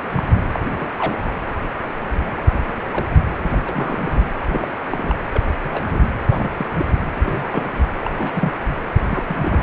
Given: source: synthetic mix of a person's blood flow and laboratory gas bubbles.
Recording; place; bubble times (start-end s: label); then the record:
Doppler ultrasound of blood flow; precordium
0.15-0.23 s: bubbles
0.54-0.59 s: bubbles
0.71-1.19 s: bubbles
1.27-1.33 s: bubbles
2.67-2.73 s: bubbles
2.91-3.06 s: bubbles
3.49-3.62 s: bubbles
3.65-4.23 s: bubbles
4.49-4.68 s: bubbles
4.89-5.15 s: bubbles
5.33-5.45 s: bubbles
5.63-6.10 s: bubbles
6.28-6.66 s: bubbles
6.77-6.85 s: bubbles
7.17-7.72 s: bubbles
8.00-8.11 s: bubbles
8.17-8.53 s: bubbles
9.09-9.23 s: bubbles
9.28-9.63 s: bubbles
From the record:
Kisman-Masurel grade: 232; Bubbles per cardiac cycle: several, 3 to 8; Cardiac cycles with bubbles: 50 to 99%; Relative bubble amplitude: moderate (0.250 to 0.450); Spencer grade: 3 (all of the cardiac periods contain showers or single bubble signals, but not dominating or overriding the cardiac motion signals); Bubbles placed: anywhere in the cardiac cycle